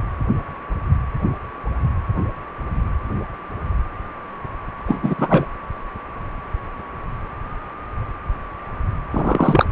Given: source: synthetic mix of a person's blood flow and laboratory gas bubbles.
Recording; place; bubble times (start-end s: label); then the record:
Doppler ultrasound of blood flow; precordium
4.87-5.15 s: bubbles
5.18-5.46 s: bubbles
9.11-9.65 s: bubbles
From the record:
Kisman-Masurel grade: 213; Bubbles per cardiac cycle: several, 3 to 8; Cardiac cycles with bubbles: 1 to 10%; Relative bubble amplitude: loud (0.450 to 0.775); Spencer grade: 1 (occasional bubble signal discernible with the cardiac motion signal, with majority of cardiac periods free of bubbles); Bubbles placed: anywhere in the cardiac cycle